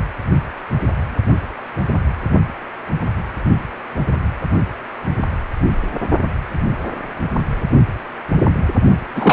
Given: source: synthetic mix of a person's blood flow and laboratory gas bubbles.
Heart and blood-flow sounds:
Doppler ultrasound of blood flow; precordium
9.15-9.33 s: bubbles
From the record:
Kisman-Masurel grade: 123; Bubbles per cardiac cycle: 1 to 2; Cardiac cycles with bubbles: 10 to 50%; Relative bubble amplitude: loud (0.450 to 0.775); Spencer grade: 2 (many but less than half of the cardiac periods contain bubble signals, singularly or in groups); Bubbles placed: only in the low amplitude regions of the cardiac cycle

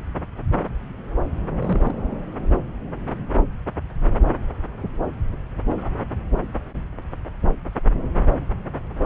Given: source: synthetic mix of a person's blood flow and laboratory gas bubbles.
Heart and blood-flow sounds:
Doppler ultrasound of blood flow; subclavian vein
1.62-1.96 s: bubbles
From the record:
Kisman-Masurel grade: 111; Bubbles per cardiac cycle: 1 to 2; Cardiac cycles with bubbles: 1 to 10%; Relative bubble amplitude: barely perceptible (0.100 to 0.250); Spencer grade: 1 (occasional bubble signal discernible with the cardiac motion signal, with majority of cardiac periods free of bubbles); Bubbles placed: anywhere in the cardiac cycle

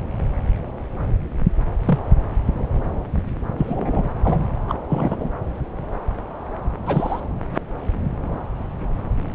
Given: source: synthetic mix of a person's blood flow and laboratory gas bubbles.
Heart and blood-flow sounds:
Doppler ultrasound of blood flow; subclavian vein
1.85-1.99 s: bubbles
3.58-4.09 s: bubbles
4.24-4.46 s: bubbles
4.68-4.74 s: bubbles
4.88-5.29 s: bubbles
6.86-7.21 s: bubbles
From the record:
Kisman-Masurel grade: 123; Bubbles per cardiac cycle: 1 to 2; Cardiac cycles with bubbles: 10 to 50%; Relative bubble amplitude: loud (0.450 to 0.775); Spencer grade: 2 (many but less than half of the cardiac periods contain bubble signals, singularly or in groups); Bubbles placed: anywhere in the cardiac cycle

